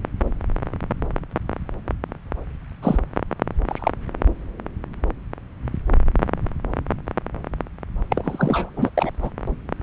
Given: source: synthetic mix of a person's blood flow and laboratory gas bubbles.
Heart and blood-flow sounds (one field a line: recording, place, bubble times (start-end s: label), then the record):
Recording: Doppler ultrasound of blood flow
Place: subclavian vein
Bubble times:
2.82-2.98 s: bubbles
3.68-3.92 s: bubbles
8.10-8.89 s: bubbles
8.97-9.11 s: bubbles
9.22-9.30 s: bubbles
From the record:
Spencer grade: 2 (many but less than half of the cardiac periods contain bubble signals, singularly or in groups)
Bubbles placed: anywhere in the cardiac cycle